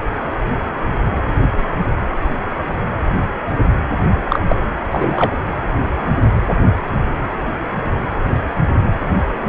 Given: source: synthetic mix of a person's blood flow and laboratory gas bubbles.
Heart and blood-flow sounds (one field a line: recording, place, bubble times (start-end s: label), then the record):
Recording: Doppler ultrasound of blood flow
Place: precordium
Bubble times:
4.29-4.39 s: bubbles
4.48-4.56 s: bubbles
4.91-5.30 s: bubbles
From the record:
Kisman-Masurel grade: 213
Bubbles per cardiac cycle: several, 3 to 8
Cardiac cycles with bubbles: 1 to 10%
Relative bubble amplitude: loud (0.450 to 0.775)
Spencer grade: 1 (occasional bubble signal discernible with the cardiac motion signal, with majority of cardiac periods free of bubbles)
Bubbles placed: anywhere in the cardiac cycle